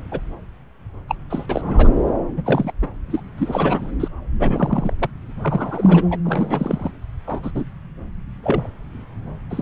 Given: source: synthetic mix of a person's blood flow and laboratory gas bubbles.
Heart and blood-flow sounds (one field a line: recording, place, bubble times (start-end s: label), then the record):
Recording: Doppler ultrasound of blood flow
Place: subclavian vein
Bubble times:
0.11-0.20 s: bubbles
1.08-1.15 s: bubbles
1.29-1.46 s: bubbles
1.49-1.92 s: bubbles
2.36-2.72 s: bubbles
2.81-2.88 s: bubbles
3.09-3.20 s: bubbles
3.38-3.92 s: bubbles
3.99-4.08 s: bubbles
4.39-4.93 s: bubbles
4.99-5.10 s: bubbles
5.42-6.19 s: bubbles
6.24-6.91 s: bubbles
7.27-7.40 s: bubbles
7.43-7.52 s: bubbles
7.54-7.65 s: bubbles
8.43-8.67 s: bubbles
9.50-9.62 s: bubbles
From the record:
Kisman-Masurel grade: 243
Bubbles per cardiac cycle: several, 3 to 8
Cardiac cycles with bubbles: 100%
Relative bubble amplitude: loud (0.450 to 0.775)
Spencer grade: 3 (all of the cardiac periods contain showers or single bubble signals, but not dominating or overriding the cardiac motion signals)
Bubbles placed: anywhere in the cardiac cycle